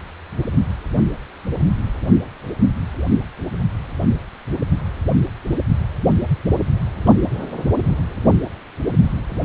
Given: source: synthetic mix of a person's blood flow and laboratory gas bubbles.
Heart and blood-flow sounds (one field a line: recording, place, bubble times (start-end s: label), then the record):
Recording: Doppler ultrasound of blood flow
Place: precordium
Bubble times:
7.05-7.13 s: bubbles
From the record:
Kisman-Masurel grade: 111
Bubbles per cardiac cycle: 1 to 2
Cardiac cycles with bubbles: 1 to 10%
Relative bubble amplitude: barely perceptible (0.100 to 0.250)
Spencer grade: 1 (occasional bubble signal discernible with the cardiac motion signal, with majority of cardiac periods free of bubbles)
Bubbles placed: anywhere in the cardiac cycle